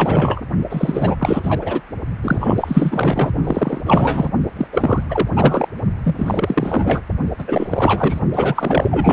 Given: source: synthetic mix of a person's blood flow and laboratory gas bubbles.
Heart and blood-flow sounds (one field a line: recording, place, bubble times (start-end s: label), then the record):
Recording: Doppler ultrasound of blood flow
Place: precordium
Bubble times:
0.00-0.41 s: bubbles
0.69-1.15 s: bubbles
1.19-1.81 s: bubbles
2.23-3.32 s: bubbles
3.44-3.81 s: bubbles
3.85-4.29 s: bubbles
4.55-4.67 s: bubbles
4.72-5.04 s: bubbles
5.08-5.28 s: bubbles
5.36-5.67 s: bubbles
6.04-7.01 s: bubbles
7.38-7.45 s: bubbles
7.47-8.20 s: bubbles
8.33-9.13 s: bubbles
From the record:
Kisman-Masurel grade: 444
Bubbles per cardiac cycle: continuous sound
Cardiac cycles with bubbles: 100%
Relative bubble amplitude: maximal (0.775 to 0.999)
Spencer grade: 4 (maximum detectable bubble signal sounding continuously throughout systole and diastole of every cardiac period, and overriding the amplitude of the normal cardiac signals)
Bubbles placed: only in the low amplitude regions of the cardiac cycle